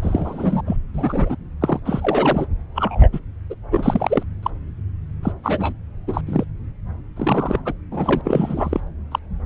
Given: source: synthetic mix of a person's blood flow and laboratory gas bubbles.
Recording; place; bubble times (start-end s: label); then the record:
Doppler ultrasound of blood flow; subclavian vein
0.02-0.62 s: bubbles
0.67-0.77 s: bubbles
0.93-1.36 s: bubbles
1.61-1.80 s: bubbles
1.85-2.46 s: bubbles
2.75-3.08 s: bubbles
3.12-3.20 s: bubbles
3.50-3.55 s: bubbles
3.71-4.23 s: bubbles
4.42-4.50 s: bubbles
5.23-5.33 s: bubbles
5.43-5.72 s: bubbles
6.07-6.21 s: bubbles
6.26-6.45 s: bubbles
7.16-7.60 s: bubbles
7.65-7.73 s: bubbles
7.91-8.21 s: bubbles
8.24-8.80 s: bubbles
9.11-9.19 s: bubbles
From the record:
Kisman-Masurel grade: 243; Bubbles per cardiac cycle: several, 3 to 8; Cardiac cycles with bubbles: 100%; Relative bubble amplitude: loud (0.450 to 0.775); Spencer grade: 3 (all of the cardiac periods contain showers or single bubble signals, but not dominating or overriding the cardiac motion signals); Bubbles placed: anywhere in the cardiac cycle